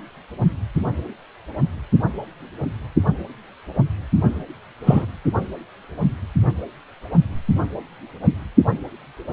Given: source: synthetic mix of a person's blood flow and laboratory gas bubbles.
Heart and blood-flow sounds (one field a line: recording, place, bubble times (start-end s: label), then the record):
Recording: Doppler ultrasound of blood flow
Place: precordium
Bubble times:
4.86-5.05 s: bubbles
From the record:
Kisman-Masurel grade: 123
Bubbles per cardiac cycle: 1 to 2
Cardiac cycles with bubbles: 10 to 50%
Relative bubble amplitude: loud (0.450 to 0.775)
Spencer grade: 2 (many but less than half of the cardiac periods contain bubble signals, singularly or in groups)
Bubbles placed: only in the low amplitude regions of the cardiac cycle